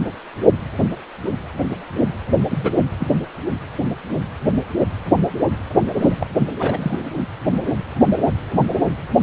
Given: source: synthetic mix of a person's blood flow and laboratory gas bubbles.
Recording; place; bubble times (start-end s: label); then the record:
Doppler ultrasound of blood flow; precordium
2.50-2.73 s: bubbles
3.00-3.06 s: bubbles
6.00-6.16 s: bubbles
6.20-6.26 s: bubbles
6.59-6.99 s: bubbles
From the record:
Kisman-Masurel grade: 122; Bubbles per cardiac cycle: 1 to 2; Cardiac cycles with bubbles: 10 to 50%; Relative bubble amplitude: moderate (0.250 to 0.450); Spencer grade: 2 (many but less than half of the cardiac periods contain bubble signals, singularly or in groups); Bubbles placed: anywhere in the cardiac cycle